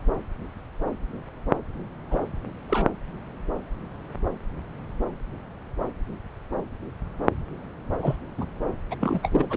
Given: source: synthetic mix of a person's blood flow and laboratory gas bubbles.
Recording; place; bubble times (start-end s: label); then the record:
Doppler ultrasound of blood flow; subclavian vein
2.10-2.23 s: bubbles
2.69-2.88 s: bubbles
8.02-8.18 s: bubbles
8.38-8.47 s: bubbles
8.91-8.96 s: bubbles
9.01-9.57 s: bubbles
From the record:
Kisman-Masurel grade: 221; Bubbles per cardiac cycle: several, 3 to 8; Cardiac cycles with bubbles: 10 to 50%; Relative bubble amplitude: barely perceptible (0.100 to 0.250); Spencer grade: 2 (many but less than half of the cardiac periods contain bubble signals, singularly or in groups); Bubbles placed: anywhere in the cardiac cycle